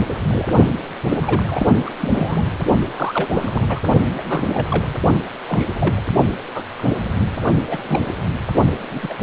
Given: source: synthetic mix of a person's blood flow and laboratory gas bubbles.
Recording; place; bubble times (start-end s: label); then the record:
Doppler ultrasound of blood flow; precordium
0.08-0.19 s: bubbles
0.28-0.47 s: bubbles
1.09-1.71 s: bubbles
1.85-1.91 s: bubbles
2.00-2.44 s: bubbles
2.89-3.82 s: bubbles
4.17-4.21 s: bubbles
4.27-4.88 s: bubbles
5.48-5.67 s: bubbles
5.75-6.01 s: bubbles
6.54-6.62 s: bubbles
6.79-6.92 s: bubbles
7.17-7.39 s: bubbles
7.67-7.78 s: bubbles
7.84-8.06 s: bubbles
8.91-8.99 s: bubbles
9.02-9.13 s: bubbles
From the record:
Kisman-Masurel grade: 242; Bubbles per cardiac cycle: several, 3 to 8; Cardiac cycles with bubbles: 100%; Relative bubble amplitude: moderate (0.250 to 0.450); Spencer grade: 3 (all of the cardiac periods contain showers or single bubble signals, but not dominating or overriding the cardiac motion signals); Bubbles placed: only in the low amplitude regions of the cardiac cycle